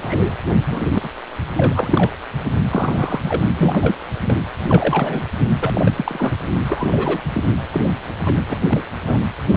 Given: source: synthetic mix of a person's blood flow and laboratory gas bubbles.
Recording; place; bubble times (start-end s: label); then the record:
Doppler ultrasound of blood flow; precordium
0.01-0.34 s: bubbles
0.70-1.09 s: bubbles
1.57-2.11 s: bubbles
2.70-3.20 s: bubbles
3.22-3.45 s: bubbles
3.57-3.96 s: bubbles
4.21-4.39 s: bubbles
4.67-5.25 s: bubbles
5.60-5.73 s: bubbles
5.75-6.36 s: bubbles
6.63-6.88 s: bubbles
6.91-7.21 s: bubbles
7.33-7.42 s: bubbles
7.71-7.92 s: bubbles
8.25-8.34 s: bubbles
8.37-8.42 s: bubbles
8.48-8.59 s: bubbles
8.67-8.82 s: bubbles
9.07-9.18 s: bubbles
9.52-9.57 s: bubbles
From the record:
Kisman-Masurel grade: 242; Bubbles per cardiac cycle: several, 3 to 8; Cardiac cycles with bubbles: 100%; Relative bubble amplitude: moderate (0.250 to 0.450); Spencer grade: 3 (all of the cardiac periods contain showers or single bubble signals, but not dominating or overriding the cardiac motion signals); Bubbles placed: anywhere in the cardiac cycle